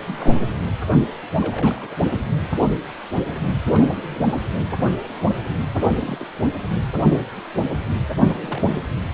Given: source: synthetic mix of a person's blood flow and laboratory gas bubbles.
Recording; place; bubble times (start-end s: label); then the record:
Doppler ultrasound of blood flow; precordium
0.00-0.43 s: bubbles
1.41-1.96 s: bubbles
2.55-2.70 s: bubbles
3.72-3.87 s: bubbles
3.94-4.42 s: bubbles
5.80-5.95 s: bubbles
6.00-6.26 s: bubbles
8.33-8.81 s: bubbles
From the record:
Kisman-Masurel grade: 221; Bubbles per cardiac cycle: several, 3 to 8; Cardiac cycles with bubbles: 10 to 50%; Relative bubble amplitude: barely perceptible (0.100 to 0.250); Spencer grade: 2 (many but less than half of the cardiac periods contain bubble signals, singularly or in groups); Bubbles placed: anywhere in the cardiac cycle